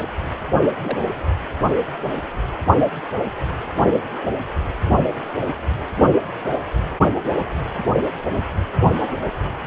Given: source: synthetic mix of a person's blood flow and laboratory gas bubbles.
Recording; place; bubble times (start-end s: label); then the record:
Doppler ultrasound of blood flow; precordium
0.81-0.98 s: bubbles
From the record:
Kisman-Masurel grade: 121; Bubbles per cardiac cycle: 1 to 2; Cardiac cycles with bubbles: 10 to 50%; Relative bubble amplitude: barely perceptible (0.100 to 0.250); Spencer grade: 2 (many but less than half of the cardiac periods contain bubble signals, singularly or in groups); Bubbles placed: only in the low amplitude regions of the cardiac cycle